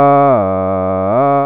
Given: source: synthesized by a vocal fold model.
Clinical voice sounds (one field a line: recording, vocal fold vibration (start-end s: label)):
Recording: sustained vowel that changes in the middle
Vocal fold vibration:
0.00-0.25 s: 140.6 Hz, open quotient 0.39
0.45-1.05 s: 95.0 Hz, open quotient 0.36
1.25-1.46 s: 140.6 Hz, open quotient 0.39